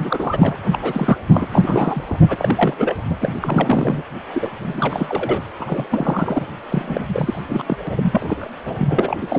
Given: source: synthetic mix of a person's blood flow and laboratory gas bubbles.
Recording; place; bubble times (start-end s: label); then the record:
Doppler ultrasound of blood flow; precordium
0.00-0.58 s: bubbles
0.72-0.78 s: bubbles
0.81-1.17 s: bubbles
1.30-1.47 s: bubbles
1.51-2.04 s: bubbles
2.07-2.19 s: bubbles
2.29-2.74 s: bubbles
2.78-2.95 s: bubbles
3.04-3.16 s: bubbles
3.21-3.32 s: bubbles
3.42-4.02 s: bubbles
4.33-4.50 s: bubbles
4.60-5.42 s: bubbles
5.56-6.46 s: bubbles
6.68-7.04 s: bubbles
7.13-7.42 s: bubbles
7.49-7.77 s: bubbles
7.87-8.51 s: bubbles
8.65-8.76 s: bubbles
8.78-9.39 s: bubbles
From the record:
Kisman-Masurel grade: 342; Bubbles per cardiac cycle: rolling drumbeat, 9 or more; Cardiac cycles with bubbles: 100%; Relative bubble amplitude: moderate (0.250 to 0.450); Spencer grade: 3 (all of the cardiac periods contain showers or single bubble signals, but not dominating or overriding the cardiac motion signals); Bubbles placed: anywhere in the cardiac cycle